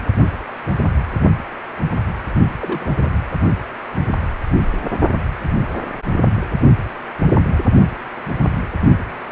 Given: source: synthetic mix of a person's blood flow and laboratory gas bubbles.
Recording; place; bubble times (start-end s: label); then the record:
Doppler ultrasound of blood flow; precordium
2.59-3.09 s: bubbles
From the record:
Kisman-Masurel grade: 211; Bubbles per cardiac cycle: several, 3 to 8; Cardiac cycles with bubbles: 1 to 10%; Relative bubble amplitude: barely perceptible (0.100 to 0.250); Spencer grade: 1 (occasional bubble signal discernible with the cardiac motion signal, with majority of cardiac periods free of bubbles); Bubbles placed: only in the low amplitude regions of the cardiac cycle